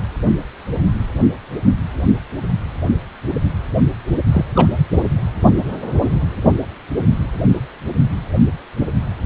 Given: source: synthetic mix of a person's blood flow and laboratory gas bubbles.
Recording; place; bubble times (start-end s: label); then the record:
Doppler ultrasound of blood flow; precordium
4.31-4.45 s: bubbles
4.55-4.68 s: bubbles
From the record:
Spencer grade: 1 (occasional bubble signal discernible with the cardiac motion signal, with majority of cardiac periods free of bubbles); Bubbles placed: only in the low amplitude regions of the cardiac cycle